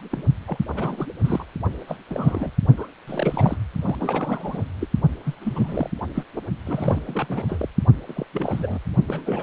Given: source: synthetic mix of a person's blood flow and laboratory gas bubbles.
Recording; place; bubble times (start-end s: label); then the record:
Doppler ultrasound of blood flow; precordium
0.10-0.23 s: bubbles
0.47-0.57 s: bubbles
0.68-1.06 s: bubbles
1.24-1.45 s: bubbles
1.87-1.96 s: bubbles
2.10-2.53 s: bubbles
2.77-2.88 s: bubbles
3.07-3.57 s: bubbles
3.81-3.96 s: bubbles
4.00-4.63 s: bubbles
4.80-4.88 s: bubbles
5.25-5.35 s: bubbles
5.41-5.89 s: bubbles
6.15-6.24 s: bubbles
6.37-6.41 s: bubbles
6.66-7.04 s: bubbles
7.07-7.69 s: bubbles
8.07-8.24 s: bubbles
8.33-8.79 s: bubbles
9.08-9.42 s: bubbles
From the record:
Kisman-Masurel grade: 342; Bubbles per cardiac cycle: rolling drumbeat, 9 or more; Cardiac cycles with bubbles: 100%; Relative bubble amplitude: moderate (0.250 to 0.450); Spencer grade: 3 (all of the cardiac periods contain showers or single bubble signals, but not dominating or overriding the cardiac motion signals); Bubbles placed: only in the low amplitude regions of the cardiac cycle